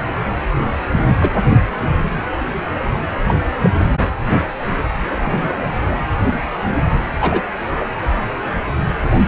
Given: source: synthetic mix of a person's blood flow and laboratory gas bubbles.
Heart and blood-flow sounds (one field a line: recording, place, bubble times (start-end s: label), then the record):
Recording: Doppler ultrasound of blood flow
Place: precordium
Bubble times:
0.97-1.04 s: bubbles
1.20-1.29 s: bubbles
3.27-3.35 s: bubbles
3.62-3.70 s: bubbles
5.15-5.71 s: bubbles
7.21-7.42 s: bubbles
7.80-7.85 s: bubbles
From the record:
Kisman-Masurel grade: 123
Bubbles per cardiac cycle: 1 to 2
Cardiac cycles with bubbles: 10 to 50%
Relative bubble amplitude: loud (0.450 to 0.775)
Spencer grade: 2 (many but less than half of the cardiac periods contain bubble signals, singularly or in groups)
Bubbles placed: anywhere in the cardiac cycle